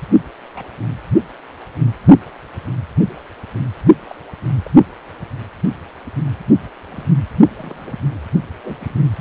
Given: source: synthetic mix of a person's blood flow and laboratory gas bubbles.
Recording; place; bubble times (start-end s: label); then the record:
Doppler ultrasound of blood flow; precordium
0.54-0.70 s: bubbles
4.04-4.16 s: bubbles
4.62-4.70 s: bubbles
6.15-6.23 s: bubbles
6.92-7.08 s: bubbles
7.58-7.92 s: bubbles
8.63-8.87 s: bubbles
From the record:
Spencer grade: 2 (many but less than half of the cardiac periods contain bubble signals, singularly or in groups); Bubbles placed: only in the low amplitude regions of the cardiac cycle